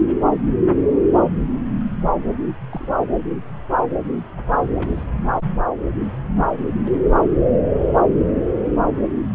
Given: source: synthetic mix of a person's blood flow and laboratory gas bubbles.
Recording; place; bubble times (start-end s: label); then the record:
Doppler ultrasound of blood flow; subclavian vein
2.70-2.91 s: bubbles
4.76-5.07 s: bubbles
From the record:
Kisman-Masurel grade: 111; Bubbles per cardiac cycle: 1 to 2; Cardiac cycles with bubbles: 1 to 10%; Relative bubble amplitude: barely perceptible (0.100 to 0.250); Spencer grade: 1 (occasional bubble signal discernible with the cardiac motion signal, with majority of cardiac periods free of bubbles); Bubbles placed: anywhere in the cardiac cycle